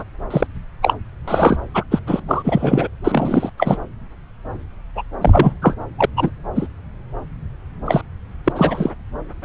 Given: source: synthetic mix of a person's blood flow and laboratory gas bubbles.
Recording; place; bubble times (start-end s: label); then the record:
Doppler ultrasound of blood flow; subclavian vein
0.00-0.04 s: bubbles
0.30-0.46 s: bubbles
0.82-0.94 s: bubbles
1.27-1.57 s: bubbles
1.74-1.83 s: bubbles
1.90-2.00 s: bubbles
2.06-2.20 s: bubbles
2.27-2.88 s: bubbles
3.04-3.50 s: bubbles
3.57-3.78 s: bubbles
4.95-5.02 s: bubbles
5.21-5.54 s: bubbles
5.62-5.75 s: bubbles
5.98-6.05 s: bubbles
6.17-6.30 s: bubbles
6.55-6.67 s: bubbles
7.86-8.02 s: bubbles
8.44-8.52 s: bubbles
8.55-8.91 s: bubbles
From the record:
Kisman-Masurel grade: 243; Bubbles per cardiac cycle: several, 3 to 8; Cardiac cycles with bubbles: 100%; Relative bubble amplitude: loud (0.450 to 0.775); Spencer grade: 3 (all of the cardiac periods contain showers or single bubble signals, but not dominating or overriding the cardiac motion signals); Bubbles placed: anywhere in the cardiac cycle